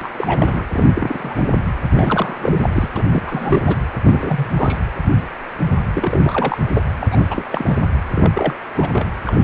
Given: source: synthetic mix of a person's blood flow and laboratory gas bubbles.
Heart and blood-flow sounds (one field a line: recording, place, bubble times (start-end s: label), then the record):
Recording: Doppler ultrasound of blood flow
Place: precordium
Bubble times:
0.01-0.09 s: bubbles
0.17-0.65 s: bubbles
0.72-0.86 s: bubbles
0.95-1.50 s: bubbles
1.94-2.70 s: bubbles
2.72-2.89 s: bubbles
2.96-3.04 s: bubbles
3.12-3.76 s: bubbles
4.04-4.77 s: bubbles
5.93-6.58 s: bubbles
6.75-6.84 s: bubbles
7.00-7.07 s: bubbles
7.12-7.17 s: bubbles
7.19-7.25 s: bubbles
7.30-7.46 s: bubbles
7.50-7.79 s: bubbles
8.15-8.30 s: bubbles
8.33-8.55 s: bubbles
8.75-9.07 s: bubbles
9.25-9.42 s: bubbles
From the record:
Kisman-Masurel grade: 332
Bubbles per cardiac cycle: rolling drumbeat, 9 or more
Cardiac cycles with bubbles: 50 to 99%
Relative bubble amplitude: moderate (0.250 to 0.450)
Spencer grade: 3 (all of the cardiac periods contain showers or single bubble signals, but not dominating or overriding the cardiac motion signals)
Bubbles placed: anywhere in the cardiac cycle